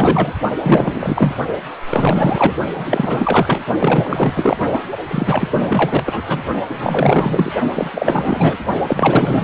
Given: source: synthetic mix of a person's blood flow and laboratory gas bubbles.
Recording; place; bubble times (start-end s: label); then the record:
Doppler ultrasound of blood flow; precordium
0.00-0.33 s: bubbles
0.62-1.33 s: bubbles
1.86-2.53 s: bubbles
2.76-3.61 s: bubbles
3.80-4.57 s: bubbles
4.60-4.67 s: bubbles
4.73-4.79 s: bubbles
5.08-6.04 s: bubbles
6.06-6.22 s: bubbles
6.27-6.42 s: bubbles
6.69-7.52 s: bubbles
7.75-8.57 s: bubbles
8.88-9.44 s: bubbles
From the record:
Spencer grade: 4 (maximum detectable bubble signal sounding continuously throughout systole and diastole of every cardiac period, and overriding the amplitude of the normal cardiac signals); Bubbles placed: only in the low amplitude regions of the cardiac cycle